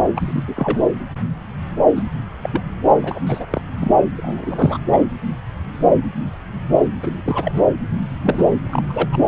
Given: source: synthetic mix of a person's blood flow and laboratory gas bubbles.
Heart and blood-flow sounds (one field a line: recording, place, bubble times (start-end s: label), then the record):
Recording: Doppler ultrasound of blood flow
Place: subclavian vein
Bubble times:
0.15-0.43 s: bubbles
0.48-0.79 s: bubbles
1.95-2.03 s: bubbles
2.42-2.61 s: bubbles
3.01-3.20 s: bubbles
3.26-3.45 s: bubbles
3.50-3.61 s: bubbles
3.77-3.92 s: bubbles
4.17-4.78 s: bubbles
4.93-4.98 s: bubbles
7.03-7.62 s: bubbles
8.23-8.44 s: bubbles
8.64-9.07 s: bubbles
9.12-9.18 s: bubbles
From the record:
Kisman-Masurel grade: 232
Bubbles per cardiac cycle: several, 3 to 8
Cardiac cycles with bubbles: 50 to 99%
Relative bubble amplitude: moderate (0.250 to 0.450)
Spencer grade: 3 (all of the cardiac periods contain showers or single bubble signals, but not dominating or overriding the cardiac motion signals)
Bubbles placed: anywhere in the cardiac cycle